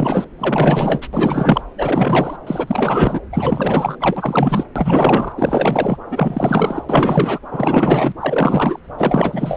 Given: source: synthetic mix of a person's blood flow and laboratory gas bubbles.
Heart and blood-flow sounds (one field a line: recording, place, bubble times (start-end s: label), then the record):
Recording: Doppler ultrasound of blood flow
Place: subclavian vein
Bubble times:
0.00-0.24 s: bubbles
0.38-1.08 s: bubbles
1.12-1.61 s: bubbles
1.77-2.36 s: bubbles
2.46-3.20 s: bubbles
3.32-3.96 s: bubbles
4.01-4.64 s: bubbles
4.76-5.33 s: bubbles
5.37-5.97 s: bubbles
6.11-6.85 s: bubbles
6.89-7.39 s: bubbles
7.51-8.13 s: bubbles
8.20-8.79 s: bubbles
8.97-9.57 s: bubbles
From the record:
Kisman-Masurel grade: 444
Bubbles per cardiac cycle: continuous sound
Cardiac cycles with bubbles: 100%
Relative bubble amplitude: maximal (0.775 to 0.999)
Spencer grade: 4 (maximum detectable bubble signal sounding continuously throughout systole and diastole of every cardiac period, and overriding the amplitude of the normal cardiac signals)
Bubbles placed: anywhere in the cardiac cycle